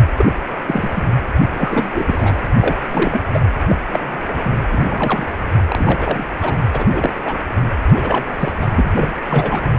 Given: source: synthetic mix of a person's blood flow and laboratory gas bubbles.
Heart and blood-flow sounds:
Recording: Doppler ultrasound of blood flow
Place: precordium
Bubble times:
0.16-0.35 s: bubbles
0.66-1.03 s: bubbles
1.56-2.36 s: bubbles
2.60-2.75 s: bubbles
2.82-3.21 s: bubbles
3.33-3.39 s: bubbles
3.67-3.75 s: bubbles
3.92-4.17 s: bubbles
4.33-4.50 s: bubbles
4.71-5.26 s: bubbles
5.67-6.25 s: bubbles
6.41-6.56 s: bubbles
6.72-6.84 s: bubbles
6.92-7.13 s: bubbles
7.19-7.38 s: bubbles
7.93-8.27 s: bubbles
8.38-8.52 s: bubbles
8.61-8.67 s: bubbles
8.74-9.09 s: bubbles
9.29-9.60 s: bubbles
From the record:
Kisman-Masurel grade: 232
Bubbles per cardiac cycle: several, 3 to 8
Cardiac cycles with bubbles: 50 to 99%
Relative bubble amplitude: moderate (0.250 to 0.450)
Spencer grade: 3 (all of the cardiac periods contain showers or single bubble signals, but not dominating or overriding the cardiac motion signals)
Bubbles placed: anywhere in the cardiac cycle

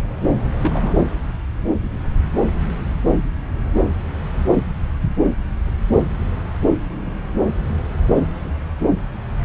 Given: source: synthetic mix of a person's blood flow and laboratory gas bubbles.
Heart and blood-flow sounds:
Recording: Doppler ultrasound of blood flow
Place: subclavian vein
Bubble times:
0.59-0.93 s: bubbles
From the record:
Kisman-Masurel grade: 211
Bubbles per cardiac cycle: several, 3 to 8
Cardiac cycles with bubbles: 1 to 10%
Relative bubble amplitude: barely perceptible (0.100 to 0.250)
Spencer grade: 1 (occasional bubble signal discernible with the cardiac motion signal, with majority of cardiac periods free of bubbles)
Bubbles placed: anywhere in the cardiac cycle

